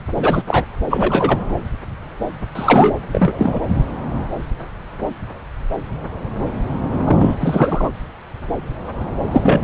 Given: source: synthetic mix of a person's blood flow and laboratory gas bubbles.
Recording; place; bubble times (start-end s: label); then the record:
Doppler ultrasound of blood flow; subclavian vein
0.18-0.43 s: bubbles
0.47-0.64 s: bubbles
0.90-1.38 s: bubbles
2.55-2.94 s: bubbles
3.12-3.59 s: bubbles
7.04-7.36 s: bubbles
7.40-7.92 s: bubbles
9.31-9.63 s: bubbles
From the record:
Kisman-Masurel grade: 223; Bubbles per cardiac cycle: several, 3 to 8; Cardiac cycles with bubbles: 10 to 50%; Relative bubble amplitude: loud (0.450 to 0.775); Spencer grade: 2 (many but less than half of the cardiac periods contain bubble signals, singularly or in groups); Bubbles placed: anywhere in the cardiac cycle